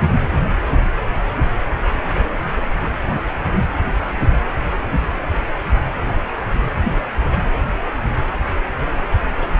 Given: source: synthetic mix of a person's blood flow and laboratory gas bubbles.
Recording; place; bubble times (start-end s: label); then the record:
Doppler ultrasound of blood flow; precordium
2.77-2.90 s: bubbles
3.06-3.22 s: bubbles
From the record:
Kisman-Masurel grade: 111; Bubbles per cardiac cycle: 1 to 2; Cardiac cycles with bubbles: 1 to 10%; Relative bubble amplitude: barely perceptible (0.100 to 0.250); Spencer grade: 1 (occasional bubble signal discernible with the cardiac motion signal, with majority of cardiac periods free of bubbles); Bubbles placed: anywhere in the cardiac cycle